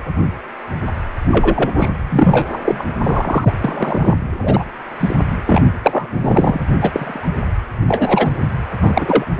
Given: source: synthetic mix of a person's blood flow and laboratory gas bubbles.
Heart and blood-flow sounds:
Doppler ultrasound of blood flow; precordium
1.31-1.70 s: bubbles
1.79-1.90 s: bubbles
2.10-2.83 s: bubbles
3.03-3.54 s: bubbles
3.60-4.17 s: bubbles
4.42-4.64 s: bubbles
5.00-5.16 s: bubbles
5.46-5.62 s: bubbles
5.83-6.08 s: bubbles
6.21-6.61 s: bubbles
6.81-7.29 s: bubbles
7.88-8.32 s: bubbles
8.80-9.25 s: bubbles
9.37-9.40 s: bubbles
From the record:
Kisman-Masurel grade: 233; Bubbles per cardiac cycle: several, 3 to 8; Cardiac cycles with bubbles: 50 to 99%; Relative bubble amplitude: loud (0.450 to 0.775); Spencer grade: 3 (all of the cardiac periods contain showers or single bubble signals, but not dominating or overriding the cardiac motion signals); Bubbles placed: anywhere in the cardiac cycle

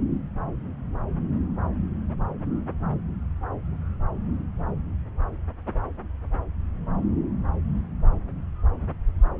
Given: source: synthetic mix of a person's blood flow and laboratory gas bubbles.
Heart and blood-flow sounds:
Doppler ultrasound of blood flow; subclavian vein
no bubbles
From the record:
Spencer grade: 0 (complete lack of bubble signals)

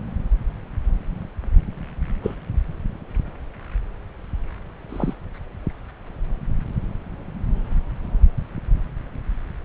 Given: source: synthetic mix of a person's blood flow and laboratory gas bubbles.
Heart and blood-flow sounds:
Doppler ultrasound of blood flow; subclavian vein
2.23-2.35 s: bubbles
4.89-5.13 s: bubbles
From the record:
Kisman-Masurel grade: 112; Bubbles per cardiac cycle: 1 to 2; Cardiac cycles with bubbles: 1 to 10%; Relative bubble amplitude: moderate (0.250 to 0.450); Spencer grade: 1 (occasional bubble signal discernible with the cardiac motion signal, with majority of cardiac periods free of bubbles); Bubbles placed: anywhere in the cardiac cycle

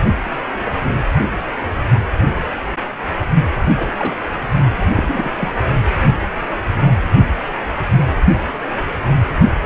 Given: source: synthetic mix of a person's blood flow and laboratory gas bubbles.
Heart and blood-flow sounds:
Doppler ultrasound of blood flow; precordium
3.76-4.17 s: bubbles
4.85-5.53 s: bubbles
From the record:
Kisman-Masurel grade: 221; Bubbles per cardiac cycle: several, 3 to 8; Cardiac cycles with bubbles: 10 to 50%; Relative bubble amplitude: barely perceptible (0.100 to 0.250); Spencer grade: 2 (many but less than half of the cardiac periods contain bubble signals, singularly or in groups); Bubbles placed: only in the low amplitude regions of the cardiac cycle

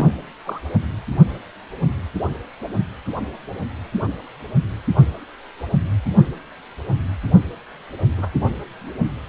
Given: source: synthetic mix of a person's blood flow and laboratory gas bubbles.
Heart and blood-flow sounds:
Doppler ultrasound of blood flow; precordium
0.00-0.10 s: bubbles
0.45-0.61 s: bubbles
8.18-8.29 s: bubbles
From the record:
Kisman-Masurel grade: 121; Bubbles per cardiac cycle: 1 to 2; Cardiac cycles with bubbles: 10 to 50%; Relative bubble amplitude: barely perceptible (0.100 to 0.250); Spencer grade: 2 (many but less than half of the cardiac periods contain bubble signals, singularly or in groups); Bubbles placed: anywhere in the cardiac cycle

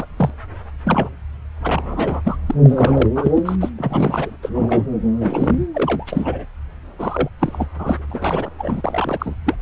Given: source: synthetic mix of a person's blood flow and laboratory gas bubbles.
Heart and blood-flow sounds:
Doppler ultrasound of blood flow; subclavian vein
0.00-0.07 s: bubbles
0.17-0.30 s: bubbles
0.84-1.09 s: bubbles
1.64-2.36 s: bubbles
2.46-2.55 s: bubbles
2.63-3.08 s: bubbles
3.15-3.31 s: bubbles
3.34-3.56 s: bubbles
3.60-3.70 s: bubbles
3.77-4.33 s: bubbles
4.42-4.50 s: bubbles
4.54-4.85 s: bubbles
5.21-5.66 s: bubbles
5.74-6.46 s: bubbles
6.98-7.29 s: bubbles
7.39-7.67 s: bubbles
7.78-8.02 s: bubbles
8.09-8.50 s: bubbles
8.59-8.82 s: bubbles
8.84-9.35 s: bubbles
9.45-9.56 s: bubbles
9.59-9.62 s: bubbles
From the record:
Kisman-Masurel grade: 232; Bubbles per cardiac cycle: several, 3 to 8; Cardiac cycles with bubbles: 50 to 99%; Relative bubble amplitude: moderate (0.250 to 0.450); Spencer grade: 3 (all of the cardiac periods contain showers or single bubble signals, but not dominating or overriding the cardiac motion signals); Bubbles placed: anywhere in the cardiac cycle

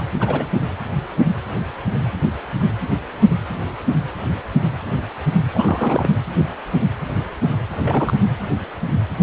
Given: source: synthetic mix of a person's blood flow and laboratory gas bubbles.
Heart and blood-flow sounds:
Doppler ultrasound of blood flow; precordium
0.00-0.04 s: bubbles
0.12-0.50 s: bubbles
5.54-6.08 s: bubbles
7.80-8.14 s: bubbles
From the record:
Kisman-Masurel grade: 222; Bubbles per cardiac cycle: several, 3 to 8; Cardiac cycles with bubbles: 10 to 50%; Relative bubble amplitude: moderate (0.250 to 0.450); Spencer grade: 2 (many but less than half of the cardiac periods contain bubble signals, singularly or in groups); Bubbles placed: anywhere in the cardiac cycle

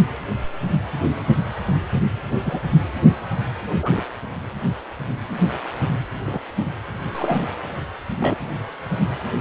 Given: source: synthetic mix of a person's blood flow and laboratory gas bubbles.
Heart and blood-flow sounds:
Doppler ultrasound of blood flow; precordium
2.46-2.59 s: bubbles
3.82-4.02 s: bubbles
6.25-6.39 s: bubbles
7.13-7.42 s: bubbles
8.19-8.36 s: bubbles
From the record:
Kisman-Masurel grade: 122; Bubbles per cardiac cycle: 1 to 2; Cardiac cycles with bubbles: 10 to 50%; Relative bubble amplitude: moderate (0.250 to 0.450); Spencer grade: 2 (many but less than half of the cardiac periods contain bubble signals, singularly or in groups); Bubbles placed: anywhere in the cardiac cycle

